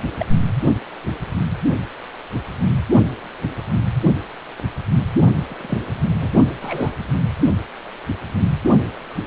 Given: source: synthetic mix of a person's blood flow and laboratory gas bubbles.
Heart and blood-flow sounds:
Doppler ultrasound of blood flow; precordium
0.19-0.26 s: bubbles
5.47-5.79 s: bubbles
6.20-6.30 s: bubbles
6.61-6.91 s: bubbles
From the record:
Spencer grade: 2 (many but less than half of the cardiac periods contain bubble signals, singularly or in groups); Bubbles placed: only in the low amplitude regions of the cardiac cycle

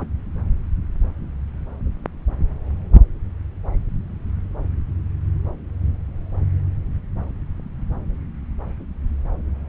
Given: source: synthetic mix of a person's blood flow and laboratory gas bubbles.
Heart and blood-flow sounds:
Doppler ultrasound of blood flow; subclavian vein
0.00-0.09 s: bubbles
From the record:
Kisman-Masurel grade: 111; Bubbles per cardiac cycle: 1 to 2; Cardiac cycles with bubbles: 1 to 10%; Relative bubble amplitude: barely perceptible (0.100 to 0.250); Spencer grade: 1 (occasional bubble signal discernible with the cardiac motion signal, with majority of cardiac periods free of bubbles); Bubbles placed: anywhere in the cardiac cycle

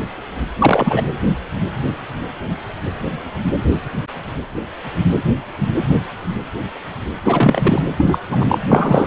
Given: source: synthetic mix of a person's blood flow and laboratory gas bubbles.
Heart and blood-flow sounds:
Doppler ultrasound of blood flow; precordium
0.58-1.03 s: bubbles
7.24-7.82 s: bubbles
7.97-8.19 s: bubbles
8.29-8.59 s: bubbles
8.68-9.07 s: bubbles
From the record:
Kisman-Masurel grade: 223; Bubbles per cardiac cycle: several, 3 to 8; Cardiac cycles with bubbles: 10 to 50%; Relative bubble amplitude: loud (0.450 to 0.775); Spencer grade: 2 (many but less than half of the cardiac periods contain bubble signals, singularly or in groups); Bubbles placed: anywhere in the cardiac cycle

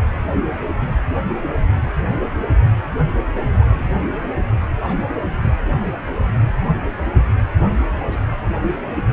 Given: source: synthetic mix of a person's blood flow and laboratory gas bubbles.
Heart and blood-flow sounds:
Doppler ultrasound of blood flow; precordium
3.33-3.67 s: bubbles
3.69-4.04 s: bubbles
4.83-5.52 s: bubbles
5.73-5.96 s: bubbles
6.14-6.25 s: bubbles
7.73-7.78 s: bubbles
7.81-7.87 s: bubbles
8.03-8.21 s: bubbles
8.29-8.37 s: bubbles
From the record:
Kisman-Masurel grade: 221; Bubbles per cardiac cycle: several, 3 to 8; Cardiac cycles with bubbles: 10 to 50%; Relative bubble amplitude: barely perceptible (0.100 to 0.250); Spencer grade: 2 (many but less than half of the cardiac periods contain bubble signals, singularly or in groups); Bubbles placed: anywhere in the cardiac cycle

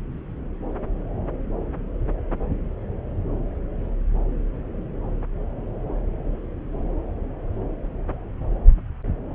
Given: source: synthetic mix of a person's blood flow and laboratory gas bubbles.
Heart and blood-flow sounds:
Doppler ultrasound of blood flow; subclavian vein
no bubbles
From the record:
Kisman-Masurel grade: 000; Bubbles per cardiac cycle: 0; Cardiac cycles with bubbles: 0%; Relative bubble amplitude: no bubbles discernible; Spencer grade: 0 (complete lack of bubble signals)

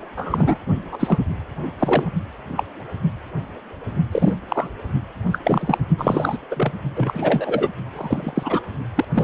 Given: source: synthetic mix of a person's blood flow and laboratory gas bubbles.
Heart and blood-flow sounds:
Doppler ultrasound of blood flow; precordium
0.17-0.58 s: bubbles
0.91-1.19 s: bubbles
1.79-2.10 s: bubbles
2.56-2.63 s: bubbles
4.11-4.34 s: bubbles
4.48-4.68 s: bubbles
5.31-5.38 s: bubbles
5.44-5.78 s: bubbles
5.97-6.37 s: bubbles
6.50-6.72 s: bubbles
6.96-7.69 s: bubbles
7.92-8.62 s: bubbles
8.95-9.04 s: bubbles
9.12-9.24 s: bubbles
From the record:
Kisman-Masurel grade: 232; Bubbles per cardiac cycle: several, 3 to 8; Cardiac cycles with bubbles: 50 to 99%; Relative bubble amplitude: moderate (0.250 to 0.450); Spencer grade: 3 (all of the cardiac periods contain showers or single bubble signals, but not dominating or overriding the cardiac motion signals); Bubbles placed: only in the low amplitude regions of the cardiac cycle

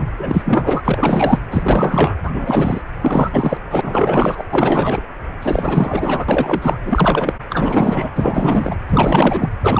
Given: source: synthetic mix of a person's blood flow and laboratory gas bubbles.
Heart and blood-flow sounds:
Doppler ultrasound of blood flow; precordium
0.00-0.07 s: bubbles
0.18-0.81 s: bubbles
0.84-1.40 s: bubbles
1.51-2.17 s: bubbles
2.24-2.81 s: bubbles
3.01-3.57 s: bubbles
3.70-4.44 s: bubbles
4.51-5.07 s: bubbles
5.42-6.25 s: bubbles
6.28-6.79 s: bubbles
6.86-7.34 s: bubbles
7.50-8.11 s: bubbles
8.15-8.75 s: bubbles
8.88-9.49 s: bubbles
9.62-9.80 s: bubbles
From the record:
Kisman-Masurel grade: 444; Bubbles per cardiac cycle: continuous sound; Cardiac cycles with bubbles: 100%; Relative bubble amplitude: maximal (0.775 to 0.999); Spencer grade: 4 (maximum detectable bubble signal sounding continuously throughout systole and diastole of every cardiac period, and overriding the amplitude of the normal cardiac signals); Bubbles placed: anywhere in the cardiac cycle

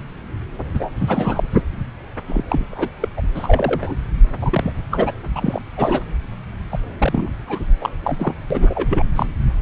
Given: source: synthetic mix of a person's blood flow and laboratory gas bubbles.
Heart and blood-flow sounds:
Doppler ultrasound of blood flow; subclavian vein
0.73-0.89 s: bubbles
0.99-1.42 s: bubbles
1.53-1.62 s: bubbles
2.27-2.43 s: bubbles
2.48-2.66 s: bubbles
2.71-2.89 s: bubbles
3.00-3.08 s: bubbles
3.17-3.21 s: bubbles
3.35-3.95 s: bubbles
4.41-4.72 s: bubbles
4.91-5.11 s: bubbles
5.35-5.62 s: bubbles
5.76-6.01 s: bubbles
6.71-6.78 s: bubbles
6.98-7.32 s: bubbles
7.46-7.59 s: bubbles
7.81-7.90 s: bubbles
8.02-8.34 s: bubbles
8.50-9.03 s: bubbles
9.15-9.26 s: bubbles
From the record:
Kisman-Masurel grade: 332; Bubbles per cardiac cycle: rolling drumbeat, 9 or more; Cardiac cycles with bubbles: 50 to 99%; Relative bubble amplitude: moderate (0.250 to 0.450); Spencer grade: 3 (all of the cardiac periods contain showers or single bubble signals, but not dominating or overriding the cardiac motion signals); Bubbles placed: anywhere in the cardiac cycle

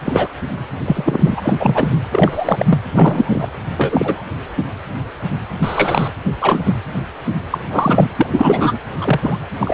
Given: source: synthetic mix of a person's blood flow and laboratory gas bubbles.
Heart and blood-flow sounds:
Doppler ultrasound of blood flow; precordium
0.04-0.28 s: bubbles
0.84-1.55 s: bubbles
1.60-1.98 s: bubbles
2.10-2.66 s: bubbles
2.70-2.79 s: bubbles
2.92-3.46 s: bubbles
3.76-4.24 s: bubbles
5.62-6.08 s: bubbles
6.41-6.62 s: bubbles
6.65-6.74 s: bubbles
7.51-7.58 s: bubbles
7.71-8.10 s: bubbles
8.17-8.79 s: bubbles
9.00-9.38 s: bubbles
9.60-9.74 s: bubbles
From the record:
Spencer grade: 3 (all of the cardiac periods contain showers or single bubble signals, but not dominating or overriding the cardiac motion signals); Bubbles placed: anywhere in the cardiac cycle

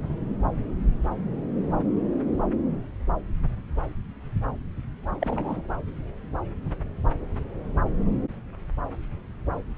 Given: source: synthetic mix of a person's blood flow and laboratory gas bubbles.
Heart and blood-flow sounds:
Doppler ultrasound of blood flow; subclavian vein
5.21-5.61 s: bubbles
From the record:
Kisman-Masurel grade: 111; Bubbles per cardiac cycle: 1 to 2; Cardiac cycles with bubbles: 1 to 10%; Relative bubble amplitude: barely perceptible (0.100 to 0.250); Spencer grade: 1 (occasional bubble signal discernible with the cardiac motion signal, with majority of cardiac periods free of bubbles); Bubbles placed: anywhere in the cardiac cycle

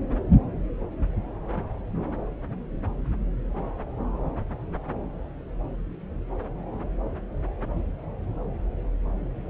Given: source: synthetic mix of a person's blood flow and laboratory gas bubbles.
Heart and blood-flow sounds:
Doppler ultrasound of blood flow; subclavian vein
no bubbles
From the record:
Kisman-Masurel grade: 000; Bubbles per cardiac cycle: 0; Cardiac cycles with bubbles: 0%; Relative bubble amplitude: no bubbles discernible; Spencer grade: 0 (complete lack of bubble signals)

